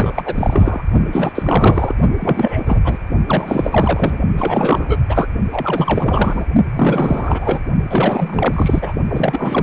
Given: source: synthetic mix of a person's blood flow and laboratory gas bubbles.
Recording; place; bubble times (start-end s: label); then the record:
Doppler ultrasound of blood flow; precordium
0.00-0.23 s: bubbles
0.25-0.83 s: bubbles
1.12-1.32 s: bubbles
1.34-1.95 s: bubbles
2.20-2.62 s: bubbles
2.66-2.80 s: bubbles
2.84-2.99 s: bubbles
3.26-4.19 s: bubbles
4.37-4.99 s: bubbles
5.08-5.28 s: bubbles
5.52-6.46 s: bubbles
6.75-7.60 s: bubbles
7.90-8.93 s: bubbles
9.08-9.63 s: bubbles
From the record:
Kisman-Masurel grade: 444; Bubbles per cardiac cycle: continuous sound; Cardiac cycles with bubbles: 100%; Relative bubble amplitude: maximal (0.775 to 0.999); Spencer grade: 4 (maximum detectable bubble signal sounding continuously throughout systole and diastole of every cardiac period, and overriding the amplitude of the normal cardiac signals); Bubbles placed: only in the low amplitude regions of the cardiac cycle